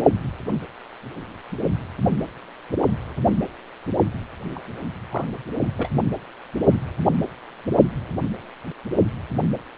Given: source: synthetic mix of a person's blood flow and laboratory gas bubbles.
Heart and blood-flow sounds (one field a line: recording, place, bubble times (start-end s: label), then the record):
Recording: Doppler ultrasound of blood flow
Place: precordium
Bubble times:
4.55-4.59 s: bubbles
5.10-5.27 s: bubbles
5.62-5.66 s: bubbles
5.77-5.89 s: bubbles
From the record:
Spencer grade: 1 (occasional bubble signal discernible with the cardiac motion signal, with majority of cardiac periods free of bubbles)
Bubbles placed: only in the low amplitude regions of the cardiac cycle